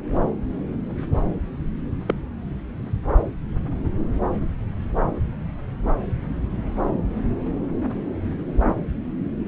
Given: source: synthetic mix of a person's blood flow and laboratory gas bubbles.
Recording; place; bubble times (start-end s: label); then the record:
Doppler ultrasound of blood flow; subclavian vein
2.07-2.14 s: bubbles
From the record:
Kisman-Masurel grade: 112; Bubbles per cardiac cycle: 1 to 2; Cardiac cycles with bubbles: 1 to 10%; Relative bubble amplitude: moderate (0.250 to 0.450); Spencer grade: 1 (occasional bubble signal discernible with the cardiac motion signal, with majority of cardiac periods free of bubbles); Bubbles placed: anywhere in the cardiac cycle